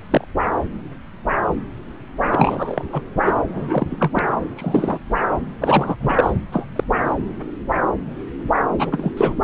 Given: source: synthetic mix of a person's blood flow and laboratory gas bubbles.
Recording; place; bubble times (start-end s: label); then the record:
Doppler ultrasound of blood flow; subclavian vein
0.11-0.26 s: bubbles
2.31-2.85 s: bubbles
2.92-3.02 s: bubbles
3.25-3.33 s: bubbles
3.49-4.11 s: bubbles
4.15-4.19 s: bubbles
4.55-5.00 s: bubbles
5.60-5.96 s: bubbles
5.99-6.30 s: bubbles
6.52-6.67 s: bubbles
6.75-6.83 s: bubbles
8.79-9.12 s: bubbles
9.17-9.34 s: bubbles
From the record:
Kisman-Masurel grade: 233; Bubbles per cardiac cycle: several, 3 to 8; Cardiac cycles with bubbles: 50 to 99%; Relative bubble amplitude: loud (0.450 to 0.775); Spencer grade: 3 (all of the cardiac periods contain showers or single bubble signals, but not dominating or overriding the cardiac motion signals); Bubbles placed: anywhere in the cardiac cycle